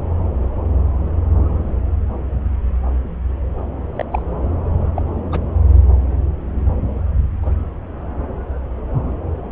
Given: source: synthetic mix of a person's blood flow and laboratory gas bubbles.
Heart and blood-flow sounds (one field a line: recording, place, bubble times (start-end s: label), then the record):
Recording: Doppler ultrasound of blood flow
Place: subclavian vein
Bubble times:
3.96-4.04 s: bubbles
4.11-4.22 s: bubbles
4.96-5.03 s: bubbles
5.32-5.41 s: bubbles
7.42-7.52 s: bubbles
From the record:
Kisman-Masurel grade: 122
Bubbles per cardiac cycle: 1 to 2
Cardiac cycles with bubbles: 10 to 50%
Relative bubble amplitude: moderate (0.250 to 0.450)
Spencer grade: 2 (many but less than half of the cardiac periods contain bubble signals, singularly or in groups)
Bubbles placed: anywhere in the cardiac cycle